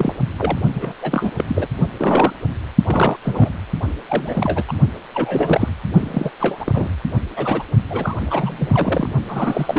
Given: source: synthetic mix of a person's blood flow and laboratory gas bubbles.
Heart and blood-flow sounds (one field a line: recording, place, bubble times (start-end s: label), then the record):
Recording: Doppler ultrasound of blood flow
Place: precordium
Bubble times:
0.00-0.15 s: bubbles
0.38-0.59 s: bubbles
0.74-0.93 s: bubbles
1.01-1.31 s: bubbles
1.38-1.44 s: bubbles
1.47-1.67 s: bubbles
1.97-2.33 s: bubbles
2.86-3.17 s: bubbles
3.22-3.52 s: bubbles
4.06-4.64 s: bubbles
4.68-4.74 s: bubbles
5.14-5.68 s: bubbles
6.00-6.31 s: bubbles
6.40-6.96 s: bubbles
7.36-7.63 s: bubbles
7.89-8.16 s: bubbles
8.26-9.09 s: bubbles
9.28-9.79 s: bubbles
From the record:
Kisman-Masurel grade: 342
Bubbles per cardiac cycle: rolling drumbeat, 9 or more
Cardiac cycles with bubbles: 100%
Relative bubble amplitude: moderate (0.250 to 0.450)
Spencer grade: 3 (all of the cardiac periods contain showers or single bubble signals, but not dominating or overriding the cardiac motion signals)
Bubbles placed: only in the low amplitude regions of the cardiac cycle